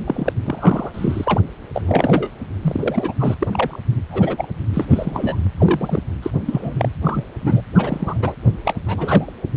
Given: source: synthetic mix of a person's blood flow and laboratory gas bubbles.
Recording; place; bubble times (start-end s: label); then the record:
Doppler ultrasound of blood flow; precordium
0.05-0.33 s: bubbles
0.44-0.91 s: bubbles
0.93-1.41 s: bubbles
1.73-2.29 s: bubbles
2.62-3.14 s: bubbles
3.19-3.35 s: bubbles
3.40-3.48 s: bubbles
3.53-3.79 s: bubbles
4.11-4.48 s: bubbles
4.74-4.86 s: bubbles
4.90-5.37 s: bubbles
5.58-6.00 s: bubbles
6.22-6.30 s: bubbles
6.46-6.74 s: bubbles
6.77-6.89 s: bubbles
7.04-7.24 s: bubbles
7.42-7.61 s: bubbles
7.75-8.35 s: bubbles
8.64-8.73 s: bubbles
8.85-9.32 s: bubbles
From the record:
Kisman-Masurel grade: 242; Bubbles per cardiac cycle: several, 3 to 8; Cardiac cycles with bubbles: 100%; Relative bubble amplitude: moderate (0.250 to 0.450); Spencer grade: 3 (all of the cardiac periods contain showers or single bubble signals, but not dominating or overriding the cardiac motion signals); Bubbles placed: anywhere in the cardiac cycle